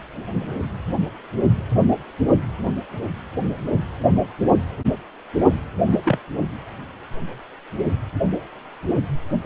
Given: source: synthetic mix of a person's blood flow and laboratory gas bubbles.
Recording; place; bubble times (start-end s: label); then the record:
Doppler ultrasound of blood flow; precordium
5.86-5.99 s: bubbles
6.05-6.19 s: bubbles
From the record:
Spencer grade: 2 (many but less than half of the cardiac periods contain bubble signals, singularly or in groups); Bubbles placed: only in the low amplitude regions of the cardiac cycle